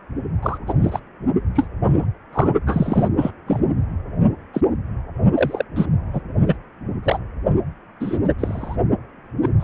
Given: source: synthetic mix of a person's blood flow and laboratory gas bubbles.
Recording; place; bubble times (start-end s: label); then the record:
Doppler ultrasound of blood flow; precordium
0.42-0.57 s: bubbles
0.67-0.73 s: bubbles
0.81-0.99 s: bubbles
1.55-1.68 s: bubbles
1.85-2.06 s: bubbles
2.32-2.48 s: bubbles
2.67-3.08 s: bubbles
3.20-3.31 s: bubbles
3.47-3.60 s: bubbles
4.54-4.62 s: bubbles
5.35-5.64 s: bubbles
5.76-5.86 s: bubbles
6.13-6.21 s: bubbles
6.47-6.56 s: bubbles
7.03-7.18 s: bubbles
8.00-8.18 s: bubbles
8.23-8.33 s: bubbles
8.38-8.76 s: bubbles
9.41-9.49 s: bubbles
9.59-9.64 s: bubbles
From the record:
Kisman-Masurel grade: 243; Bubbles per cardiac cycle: several, 3 to 8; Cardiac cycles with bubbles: 100%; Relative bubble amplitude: loud (0.450 to 0.775); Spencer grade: 3 (all of the cardiac periods contain showers or single bubble signals, but not dominating or overriding the cardiac motion signals); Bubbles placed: only in the low amplitude regions of the cardiac cycle